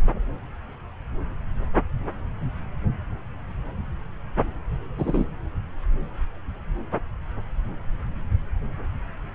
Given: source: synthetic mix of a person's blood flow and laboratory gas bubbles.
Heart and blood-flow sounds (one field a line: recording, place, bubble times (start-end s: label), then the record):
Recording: Doppler ultrasound of blood flow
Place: subclavian vein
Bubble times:
4.98-5.25 s: bubbles
From the record:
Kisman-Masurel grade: 122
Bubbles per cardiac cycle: 1 to 2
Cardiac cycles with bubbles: 10 to 50%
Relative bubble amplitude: moderate (0.250 to 0.450)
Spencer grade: 2 (many but less than half of the cardiac periods contain bubble signals, singularly or in groups)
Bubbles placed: anywhere in the cardiac cycle